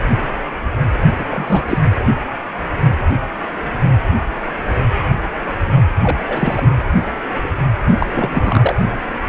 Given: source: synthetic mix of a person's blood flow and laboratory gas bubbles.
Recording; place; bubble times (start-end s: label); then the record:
Doppler ultrasound of blood flow; precordium
1.19-1.25 s: bubbles
1.29-1.77 s: bubbles
6.02-6.18 s: bubbles
6.28-6.69 s: bubbles
7.87-8.06 s: bubbles
8.14-8.74 s: bubbles
From the record:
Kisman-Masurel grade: 222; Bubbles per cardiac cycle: several, 3 to 8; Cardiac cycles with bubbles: 10 to 50%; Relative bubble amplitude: moderate (0.250 to 0.450); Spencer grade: 2 (many but less than half of the cardiac periods contain bubble signals, singularly or in groups); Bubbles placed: anywhere in the cardiac cycle